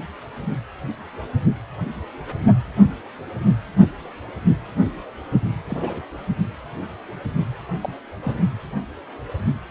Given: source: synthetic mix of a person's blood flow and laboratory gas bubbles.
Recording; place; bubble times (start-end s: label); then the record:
Doppler ultrasound of blood flow; precordium
5.69-6.01 s: bubbles
7.83-7.94 s: bubbles
8.22-8.35 s: bubbles
From the record:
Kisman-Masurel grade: 121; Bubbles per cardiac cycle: 1 to 2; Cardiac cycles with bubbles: 10 to 50%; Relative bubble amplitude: barely perceptible (0.100 to 0.250); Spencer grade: 2 (many but less than half of the cardiac periods contain bubble signals, singularly or in groups); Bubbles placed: anywhere in the cardiac cycle